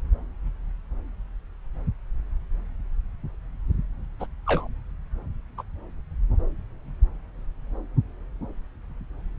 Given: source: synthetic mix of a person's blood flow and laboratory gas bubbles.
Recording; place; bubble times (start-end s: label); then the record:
Doppler ultrasound of blood flow; subclavian vein
4.20-4.26 s: bubbles
4.46-4.67 s: bubbles
5.58-5.62 s: bubbles
From the record:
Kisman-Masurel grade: 122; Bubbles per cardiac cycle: 1 to 2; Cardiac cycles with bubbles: 10 to 50%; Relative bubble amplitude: moderate (0.250 to 0.450); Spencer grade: 2 (many but less than half of the cardiac periods contain bubble signals, singularly or in groups); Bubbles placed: anywhere in the cardiac cycle